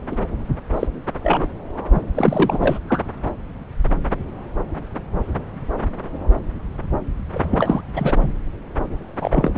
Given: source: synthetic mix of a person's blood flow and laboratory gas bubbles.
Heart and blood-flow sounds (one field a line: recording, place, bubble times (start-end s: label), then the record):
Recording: Doppler ultrasound of blood flow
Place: subclavian vein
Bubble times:
0.11-0.15 s: bubbles
0.75-0.87 s: bubbles
1.23-1.47 s: bubbles
1.93-2.02 s: bubbles
2.15-2.79 s: bubbles
2.89-3.01 s: bubbles
7.35-7.40 s: bubbles
7.42-7.81 s: bubbles
7.95-8.32 s: bubbles
9.21-9.51 s: bubbles
9.55-9.57 s: bubbles
From the record:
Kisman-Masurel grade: 233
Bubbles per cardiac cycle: several, 3 to 8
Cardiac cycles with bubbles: 50 to 99%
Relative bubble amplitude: loud (0.450 to 0.775)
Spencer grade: 3 (all of the cardiac periods contain showers or single bubble signals, but not dominating or overriding the cardiac motion signals)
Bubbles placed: anywhere in the cardiac cycle